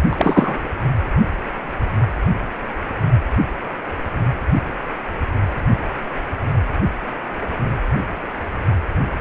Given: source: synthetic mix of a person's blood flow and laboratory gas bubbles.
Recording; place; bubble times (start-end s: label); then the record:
Doppler ultrasound of blood flow; precordium
0.11-0.72 s: bubbles
From the record:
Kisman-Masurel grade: 213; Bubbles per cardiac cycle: several, 3 to 8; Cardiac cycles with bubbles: 1 to 10%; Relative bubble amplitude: loud (0.450 to 0.775); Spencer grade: 1 (occasional bubble signal discernible with the cardiac motion signal, with majority of cardiac periods free of bubbles); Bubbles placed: anywhere in the cardiac cycle